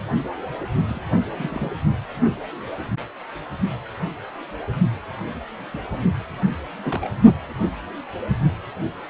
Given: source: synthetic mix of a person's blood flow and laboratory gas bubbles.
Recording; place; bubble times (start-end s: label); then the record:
Doppler ultrasound of blood flow; precordium
0.87-1.02 s: bubbles
1.32-1.72 s: bubbles
5.72-5.78 s: bubbles
6.83-7.11 s: bubbles
From the record:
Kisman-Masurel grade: 121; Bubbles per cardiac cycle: 1 to 2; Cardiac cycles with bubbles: 10 to 50%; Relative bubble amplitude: barely perceptible (0.100 to 0.250); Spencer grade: 2 (many but less than half of the cardiac periods contain bubble signals, singularly or in groups); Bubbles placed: only in the low amplitude regions of the cardiac cycle